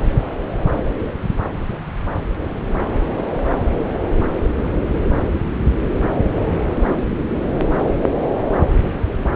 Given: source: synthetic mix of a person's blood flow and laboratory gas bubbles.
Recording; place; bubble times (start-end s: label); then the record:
Doppler ultrasound of blood flow; subclavian vein
no bubbles
From the record:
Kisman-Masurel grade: 000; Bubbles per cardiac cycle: 0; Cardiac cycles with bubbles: 0%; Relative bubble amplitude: no bubbles discernible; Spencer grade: 0 (complete lack of bubble signals)